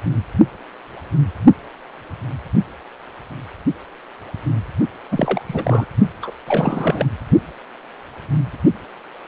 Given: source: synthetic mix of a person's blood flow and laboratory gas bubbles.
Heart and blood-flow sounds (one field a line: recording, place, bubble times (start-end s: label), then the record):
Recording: Doppler ultrasound of blood flow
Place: precordium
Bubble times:
5.11-5.42 s: bubbles
5.47-5.86 s: bubbles
6.22-6.30 s: bubbles
6.47-7.05 s: bubbles
From the record:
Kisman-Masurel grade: 332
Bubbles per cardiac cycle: rolling drumbeat, 9 or more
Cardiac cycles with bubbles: 50 to 99%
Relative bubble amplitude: moderate (0.250 to 0.450)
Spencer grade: 3 (all of the cardiac periods contain showers or single bubble signals, but not dominating or overriding the cardiac motion signals)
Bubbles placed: only in the low amplitude regions of the cardiac cycle